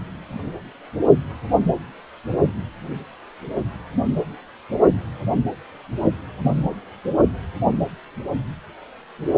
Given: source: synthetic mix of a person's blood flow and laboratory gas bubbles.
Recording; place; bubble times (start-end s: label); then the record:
Doppler ultrasound of blood flow; precordium
no bubbles
From the record:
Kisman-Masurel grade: 000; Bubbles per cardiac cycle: 0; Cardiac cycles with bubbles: 0%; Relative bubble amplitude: no bubbles discernible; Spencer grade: 0 (complete lack of bubble signals)